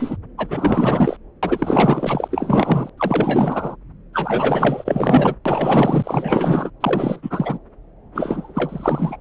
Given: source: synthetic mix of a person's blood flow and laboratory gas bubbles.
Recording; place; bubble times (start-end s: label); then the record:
Doppler ultrasound of blood flow; subclavian vein
0.00-0.17 s: bubbles
0.38-1.17 s: bubbles
1.42-2.90 s: bubbles
2.98-3.76 s: bubbles
4.13-5.34 s: bubbles
5.45-6.71 s: bubbles
6.80-7.58 s: bubbles
8.14-9.17 s: bubbles
From the record:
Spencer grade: 4 (maximum detectable bubble signal sounding continuously throughout systole and diastole of every cardiac period, and overriding the amplitude of the normal cardiac signals); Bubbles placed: anywhere in the cardiac cycle